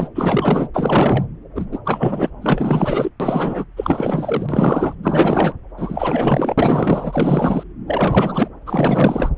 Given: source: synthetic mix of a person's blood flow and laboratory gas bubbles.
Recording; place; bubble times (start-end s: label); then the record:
Doppler ultrasound of blood flow; subclavian vein
0.00-0.09 s: bubbles
0.14-0.69 s: bubbles
0.74-1.24 s: bubbles
1.54-1.66 s: bubbles
1.72-1.78 s: bubbles
1.84-2.30 s: bubbles
2.41-3.10 s: bubbles
3.20-3.65 s: bubbles
3.76-4.46 s: bubbles
4.49-4.95 s: bubbles
5.03-5.53 s: bubbles
5.77-6.54 s: bubbles
6.58-7.63 s: bubbles
7.88-8.48 s: bubbles
8.66-9.29 s: bubbles
From the record:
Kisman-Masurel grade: 444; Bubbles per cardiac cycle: continuous sound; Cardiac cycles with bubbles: 100%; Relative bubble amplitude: maximal (0.775 to 0.999); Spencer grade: 4 (maximum detectable bubble signal sounding continuously throughout systole and diastole of every cardiac period, and overriding the amplitude of the normal cardiac signals); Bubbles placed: anywhere in the cardiac cycle